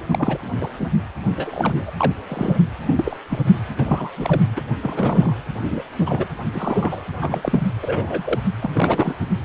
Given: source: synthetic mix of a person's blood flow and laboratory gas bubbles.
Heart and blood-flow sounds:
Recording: Doppler ultrasound of blood flow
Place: precordium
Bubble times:
0.01-0.03 s: bubbles
0.11-0.38 s: bubbles
0.60-0.69 s: bubbles
0.78-0.88 s: bubbles
1.37-1.91 s: bubbles
1.98-2.12 s: bubbles
2.29-2.59 s: bubbles
2.85-3.17 s: bubbles
3.29-3.39 s: bubbles
3.78-4.10 s: bubbles
4.16-4.41 s: bubbles
4.56-4.61 s: bubbles
4.81-5.33 s: bubbles
5.62-5.84 s: bubbles
6.06-6.27 s: bubbles
6.53-7.02 s: bubbles
7.21-7.67 s: bubbles
7.82-8.38 s: bubbles
8.62-8.70 s: bubbles
8.72-9.15 s: bubbles
From the record:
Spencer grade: 3 (all of the cardiac periods contain showers or single bubble signals, but not dominating or overriding the cardiac motion signals)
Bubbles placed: anywhere in the cardiac cycle

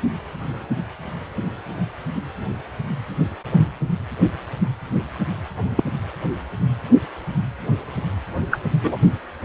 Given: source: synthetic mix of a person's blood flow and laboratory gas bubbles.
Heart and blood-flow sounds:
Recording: Doppler ultrasound of blood flow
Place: precordium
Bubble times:
5.76-5.84 s: bubbles
8.50-8.58 s: bubbles
8.83-9.02 s: bubbles
From the record:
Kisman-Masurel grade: 123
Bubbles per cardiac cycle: 1 to 2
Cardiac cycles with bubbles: 10 to 50%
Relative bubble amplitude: loud (0.450 to 0.775)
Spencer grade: 2 (many but less than half of the cardiac periods contain bubble signals, singularly or in groups)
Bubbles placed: only in the low amplitude regions of the cardiac cycle

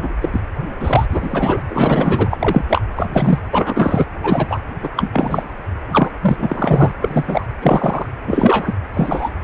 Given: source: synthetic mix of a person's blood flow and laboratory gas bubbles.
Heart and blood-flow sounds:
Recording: Doppler ultrasound of blood flow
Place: precordium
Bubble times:
0.02-0.09 s: bubbles
0.21-0.30 s: bubbles
0.32-0.41 s: bubbles
0.80-1.06 s: bubbles
1.10-1.63 s: bubbles
1.70-2.65 s: bubbles
2.69-2.83 s: bubbles
2.96-3.08 s: bubbles
3.10-3.39 s: bubbles
3.53-4.05 s: bubbles
4.23-4.59 s: bubbles
4.83-4.89 s: bubbles
4.96-5.53 s: bubbles
5.91-6.11 s: bubbles
6.21-6.95 s: bubbles
7.00-7.46 s: bubbles
7.62-8.06 s: bubbles
8.26-8.73 s: bubbles
8.93-9.33 s: bubbles
From the record:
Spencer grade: 3 (all of the cardiac periods contain showers or single bubble signals, but not dominating or overriding the cardiac motion signals)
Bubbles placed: anywhere in the cardiac cycle

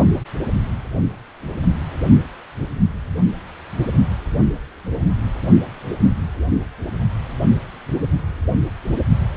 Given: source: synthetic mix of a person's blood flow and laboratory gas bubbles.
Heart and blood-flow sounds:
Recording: Doppler ultrasound of blood flow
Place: precordium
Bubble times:
no bubbles
From the record:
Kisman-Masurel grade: 000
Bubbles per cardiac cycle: 0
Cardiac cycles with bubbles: 0%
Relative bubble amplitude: no bubbles discernible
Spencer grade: 0 (complete lack of bubble signals)

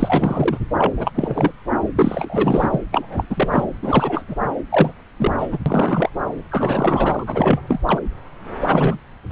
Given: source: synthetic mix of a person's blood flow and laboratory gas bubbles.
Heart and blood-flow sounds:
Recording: Doppler ultrasound of blood flow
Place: subclavian vein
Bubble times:
0.00-0.59 s: bubbles
0.78-0.93 s: bubbles
0.96-1.11 s: bubbles
1.14-1.51 s: bubbles
1.96-2.83 s: bubbles
2.92-3.24 s: bubbles
3.29-3.64 s: bubbles
3.82-4.25 s: bubbles
4.28-4.36 s: bubbles
4.70-4.93 s: bubbles
5.17-5.31 s: bubbles
5.38-5.48 s: bubbles
5.52-5.59 s: bubbles
5.66-6.10 s: bubbles
6.51-7.24 s: bubbles
7.27-7.62 s: bubbles
7.67-7.79 s: bubbles
7.86-8.00 s: bubbles
8.68-8.97 s: bubbles
9.29-9.32 s: bubbles
From the record:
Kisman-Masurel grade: 343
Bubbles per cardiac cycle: rolling drumbeat, 9 or more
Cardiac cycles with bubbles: 100%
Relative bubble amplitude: loud (0.450 to 0.775)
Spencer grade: 3 (all of the cardiac periods contain showers or single bubble signals, but not dominating or overriding the cardiac motion signals)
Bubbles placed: anywhere in the cardiac cycle

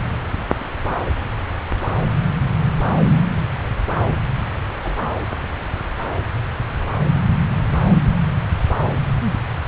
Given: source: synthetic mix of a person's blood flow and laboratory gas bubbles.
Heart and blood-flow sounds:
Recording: Doppler ultrasound of blood flow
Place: subclavian vein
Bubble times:
4.83-4.98 s: bubbles
From the record:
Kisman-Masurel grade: 111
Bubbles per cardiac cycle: 1 to 2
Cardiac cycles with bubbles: 1 to 10%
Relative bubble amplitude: barely perceptible (0.100 to 0.250)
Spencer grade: 1 (occasional bubble signal discernible with the cardiac motion signal, with majority of cardiac periods free of bubbles)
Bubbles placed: anywhere in the cardiac cycle

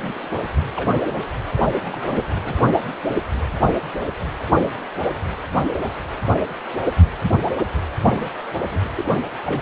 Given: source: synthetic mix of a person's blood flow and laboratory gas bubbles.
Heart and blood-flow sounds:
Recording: Doppler ultrasound of blood flow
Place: precordium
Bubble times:
0.00-0.28 s: bubbles
0.76-0.89 s: bubbles
1.19-1.24 s: bubbles
1.57-1.64 s: bubbles
1.81-2.22 s: bubbles
2.44-2.67 s: bubbles
7.57-7.69 s: bubbles
8.09-8.29 s: bubbles
8.71-8.84 s: bubbles
8.95-9.04 s: bubbles
9.46-9.61 s: bubbles
From the record:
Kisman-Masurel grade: 221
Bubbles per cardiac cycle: several, 3 to 8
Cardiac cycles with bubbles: 10 to 50%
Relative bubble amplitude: barely perceptible (0.100 to 0.250)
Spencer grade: 2 (many but less than half of the cardiac periods contain bubble signals, singularly or in groups)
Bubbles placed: anywhere in the cardiac cycle

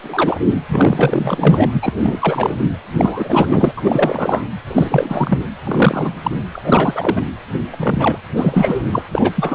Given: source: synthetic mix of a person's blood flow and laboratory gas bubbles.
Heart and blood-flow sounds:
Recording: Doppler ultrasound of blood flow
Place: precordium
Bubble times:
0.00-0.40 s: bubbles
0.69-1.69 s: bubbles
1.73-1.94 s: bubbles
2.03-2.55 s: bubbles
2.97-3.72 s: bubbles
3.77-3.81 s: bubbles
3.84-4.44 s: bubbles
4.67-5.39 s: bubbles
5.65-6.17 s: bubbles
6.23-6.31 s: bubbles
6.53-7.22 s: bubbles
7.70-8.17 s: bubbles
8.37-8.83 s: bubbles
8.92-9.03 s: bubbles
9.12-9.32 s: bubbles
9.35-9.55 s: bubbles
From the record:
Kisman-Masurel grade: 343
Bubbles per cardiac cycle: rolling drumbeat, 9 or more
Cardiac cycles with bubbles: 100%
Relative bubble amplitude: loud (0.450 to 0.775)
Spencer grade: 3 (all of the cardiac periods contain showers or single bubble signals, but not dominating or overriding the cardiac motion signals)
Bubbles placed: anywhere in the cardiac cycle

